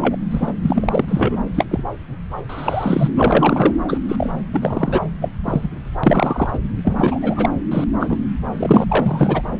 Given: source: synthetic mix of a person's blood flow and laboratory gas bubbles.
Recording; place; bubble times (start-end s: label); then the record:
Doppler ultrasound of blood flow; subclavian vein
0.00-0.16 s: bubbles
0.31-0.53 s: bubbles
0.62-1.05 s: bubbles
1.08-1.37 s: bubbles
1.54-1.65 s: bubbles
1.70-1.84 s: bubbles
2.37-2.42 s: bubbles
2.49-3.10 s: bubbles
3.15-3.73 s: bubbles
3.88-3.98 s: bubbles
4.08-4.29 s: bubbles
4.52-5.01 s: bubbles
5.21-5.29 s: bubbles
5.45-5.70 s: bubbles
6.03-6.50 s: bubbles
6.53-6.59 s: bubbles
6.84-7.54 s: bubbles
7.71-7.85 s: bubbles
8.00-8.20 s: bubbles
8.58-8.85 s: bubbles
8.89-9.42 s: bubbles
From the record:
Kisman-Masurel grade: 243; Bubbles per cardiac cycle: several, 3 to 8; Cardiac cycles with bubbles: 100%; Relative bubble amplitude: loud (0.450 to 0.775); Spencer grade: 3 (all of the cardiac periods contain showers or single bubble signals, but not dominating or overriding the cardiac motion signals); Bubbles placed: anywhere in the cardiac cycle